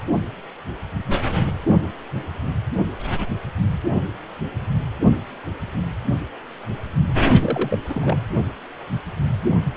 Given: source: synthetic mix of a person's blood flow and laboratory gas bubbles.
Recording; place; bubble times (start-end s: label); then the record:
Doppler ultrasound of blood flow; precordium
7.41-7.78 s: bubbles
7.88-8.20 s: bubbles
From the record:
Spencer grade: 1 (occasional bubble signal discernible with the cardiac motion signal, with majority of cardiac periods free of bubbles); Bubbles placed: only in the low amplitude regions of the cardiac cycle